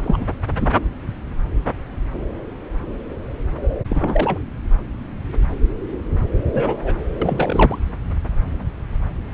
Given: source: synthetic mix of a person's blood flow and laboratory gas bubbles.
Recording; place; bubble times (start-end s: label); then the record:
Doppler ultrasound of blood flow; subclavian vein
0.04-0.29 s: bubbles
0.56-0.73 s: bubbles
3.90-4.38 s: bubbles
6.53-6.96 s: bubbles
7.21-7.78 s: bubbles
From the record:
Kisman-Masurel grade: 222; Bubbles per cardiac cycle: several, 3 to 8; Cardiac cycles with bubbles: 10 to 50%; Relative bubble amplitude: moderate (0.250 to 0.450); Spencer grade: 2 (many but less than half of the cardiac periods contain bubble signals, singularly or in groups); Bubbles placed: anywhere in the cardiac cycle